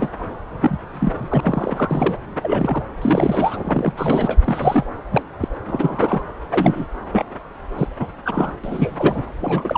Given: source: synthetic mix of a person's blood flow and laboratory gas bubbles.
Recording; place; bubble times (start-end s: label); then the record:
Doppler ultrasound of blood flow; subclavian vein
0.00-0.09 s: bubbles
0.60-0.78 s: bubbles
0.93-2.17 s: bubbles
2.42-2.83 s: bubbles
3.02-3.59 s: bubbles
3.65-3.92 s: bubbles
3.97-4.37 s: bubbles
4.45-4.86 s: bubbles
5.11-5.23 s: bubbles
5.40-5.48 s: bubbles
5.67-6.24 s: bubbles
6.50-6.87 s: bubbles
7.11-7.24 s: bubbles
7.78-7.87 s: bubbles
7.99-8.07 s: bubbles
8.25-8.54 s: bubbles
8.63-9.22 s: bubbles
9.40-9.78 s: bubbles
From the record:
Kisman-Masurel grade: 242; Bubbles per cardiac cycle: several, 3 to 8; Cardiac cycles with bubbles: 100%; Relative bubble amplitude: moderate (0.250 to 0.450); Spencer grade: 3 (all of the cardiac periods contain showers or single bubble signals, but not dominating or overriding the cardiac motion signals); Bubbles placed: anywhere in the cardiac cycle